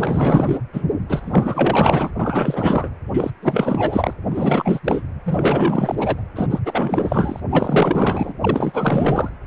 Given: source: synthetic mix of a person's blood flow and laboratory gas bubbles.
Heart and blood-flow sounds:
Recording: Doppler ultrasound of blood flow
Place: precordium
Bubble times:
0.00-0.58 s: bubbles
0.72-0.85 s: bubbles
1.09-2.10 s: bubbles
2.19-2.90 s: bubbles
3.12-3.30 s: bubbles
3.42-4.13 s: bubbles
4.29-4.80 s: bubbles
4.84-5.02 s: bubbles
5.24-6.24 s: bubbles
6.35-6.59 s: bubbles
6.65-7.40 s: bubbles
7.50-8.33 s: bubbles
8.41-9.32 s: bubbles
From the record:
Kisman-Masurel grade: 444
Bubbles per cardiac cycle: continuous sound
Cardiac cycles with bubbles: 100%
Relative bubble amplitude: maximal (0.775 to 0.999)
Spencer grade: 4 (maximum detectable bubble signal sounding continuously throughout systole and diastole of every cardiac period, and overriding the amplitude of the normal cardiac signals)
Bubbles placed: anywhere in the cardiac cycle

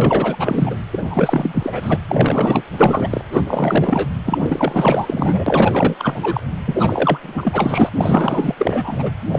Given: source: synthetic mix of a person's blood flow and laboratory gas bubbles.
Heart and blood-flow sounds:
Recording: Doppler ultrasound of blood flow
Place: precordium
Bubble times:
0.00-0.76 s: bubbles
0.93-1.98 s: bubbles
2.08-2.63 s: bubbles
2.77-3.21 s: bubbles
3.32-4.11 s: bubbles
4.26-5.95 s: bubbles
5.99-6.41 s: bubbles
6.66-7.19 s: bubbles
7.22-7.89 s: bubbles
7.96-8.55 s: bubbles
8.58-9.11 s: bubbles
9.31-9.39 s: bubbles
From the record:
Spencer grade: 4 (maximum detectable bubble signal sounding continuously throughout systole and diastole of every cardiac period, and overriding the amplitude of the normal cardiac signals)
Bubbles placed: anywhere in the cardiac cycle

